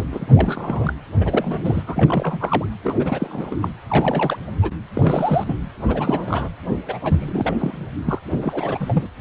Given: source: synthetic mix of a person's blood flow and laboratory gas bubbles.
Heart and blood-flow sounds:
Doppler ultrasound of blood flow; precordium
0.00-0.05 s: bubbles
0.12-0.26 s: bubbles
0.34-0.93 s: bubbles
1.19-1.83 s: bubbles
1.86-2.65 s: bubbles
2.83-2.95 s: bubbles
2.99-3.56 s: bubbles
3.61-3.69 s: bubbles
3.89-4.37 s: bubbles
4.62-4.71 s: bubbles
4.94-5.56 s: bubbles
5.88-6.49 s: bubbles
6.87-6.99 s: bubbles
7.04-7.56 s: bubbles
7.58-7.87 s: bubbles
8.05-8.19 s: bubbles
8.30-9.06 s: bubbles
From the record:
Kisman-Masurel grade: 342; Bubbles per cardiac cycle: rolling drumbeat, 9 or more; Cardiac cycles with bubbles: 100%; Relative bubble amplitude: moderate (0.250 to 0.450); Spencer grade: 3 (all of the cardiac periods contain showers or single bubble signals, but not dominating or overriding the cardiac motion signals); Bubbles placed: anywhere in the cardiac cycle

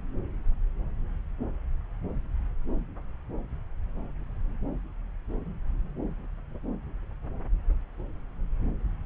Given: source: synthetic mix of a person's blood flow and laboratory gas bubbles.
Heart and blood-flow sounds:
Doppler ultrasound of blood flow; subclavian vein
no bubbles
From the record:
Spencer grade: 0 (complete lack of bubble signals)

